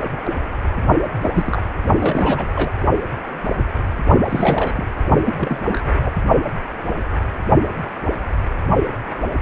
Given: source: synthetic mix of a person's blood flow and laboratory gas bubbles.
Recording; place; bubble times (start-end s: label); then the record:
Doppler ultrasound of blood flow; precordium
1.21-1.29 s: bubbles
1.34-1.62 s: bubbles
2.00-2.50 s: bubbles
2.54-2.73 s: bubbles
4.27-4.87 s: bubbles
5.25-5.34 s: bubbles
5.37-6.12 s: bubbles
From the record:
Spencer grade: 2 (many but less than half of the cardiac periods contain bubble signals, singularly or in groups); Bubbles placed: only in the low amplitude regions of the cardiac cycle